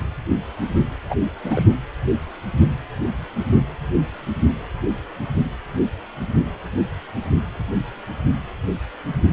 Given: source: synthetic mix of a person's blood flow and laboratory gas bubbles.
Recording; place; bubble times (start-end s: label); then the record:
Doppler ultrasound of blood flow; precordium
1.09-1.16 s: bubbles
1.44-1.64 s: bubbles
From the record:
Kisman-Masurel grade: 211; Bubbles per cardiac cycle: several, 3 to 8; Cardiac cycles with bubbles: 1 to 10%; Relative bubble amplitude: barely perceptible (0.100 to 0.250); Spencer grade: 1 (occasional bubble signal discernible with the cardiac motion signal, with majority of cardiac periods free of bubbles); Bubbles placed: anywhere in the cardiac cycle